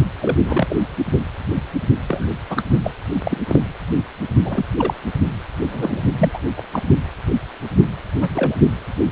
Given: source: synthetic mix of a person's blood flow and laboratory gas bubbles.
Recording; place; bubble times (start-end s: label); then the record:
Doppler ultrasound of blood flow; precordium
0.22-0.37 s: bubbles
0.45-0.76 s: bubbles
2.08-2.29 s: bubbles
2.50-2.62 s: bubbles
2.83-2.91 s: bubbles
3.24-3.38 s: bubbles
3.48-3.61 s: bubbles
4.44-4.65 s: bubbles
4.78-4.94 s: bubbles
5.61-6.01 s: bubbles
6.18-6.38 s: bubbles
6.57-6.61 s: bubbles
6.71-6.83 s: bubbles
8.20-8.54 s: bubbles
From the record:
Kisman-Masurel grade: 232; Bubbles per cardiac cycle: several, 3 to 8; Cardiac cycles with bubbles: 50 to 99%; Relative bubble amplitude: moderate (0.250 to 0.450); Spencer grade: 3 (all of the cardiac periods contain showers or single bubble signals, but not dominating or overriding the cardiac motion signals); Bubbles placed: only in the low amplitude regions of the cardiac cycle